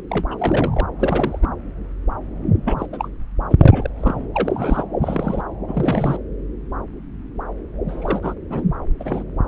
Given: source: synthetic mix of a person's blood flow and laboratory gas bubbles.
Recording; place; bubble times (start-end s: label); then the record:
Doppler ultrasound of blood flow; subclavian vein
0.10-0.24 s: bubbles
0.28-0.35 s: bubbles
0.39-0.86 s: bubbles
0.99-1.39 s: bubbles
1.42-1.48 s: bubbles
2.65-2.87 s: bubbles
2.92-3.08 s: bubbles
3.50-3.55 s: bubbles
3.59-3.90 s: bubbles
3.96-4.27 s: bubbles
4.33-4.84 s: bubbles
5.01-5.42 s: bubbles
5.67-6.17 s: bubbles
7.88-8.35 s: bubbles
8.50-8.63 s: bubbles
8.99-9.24 s: bubbles
From the record:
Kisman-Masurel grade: 232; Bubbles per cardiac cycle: several, 3 to 8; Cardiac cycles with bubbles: 50 to 99%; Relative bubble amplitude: moderate (0.250 to 0.450); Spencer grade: 3 (all of the cardiac periods contain showers or single bubble signals, but not dominating or overriding the cardiac motion signals); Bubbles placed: anywhere in the cardiac cycle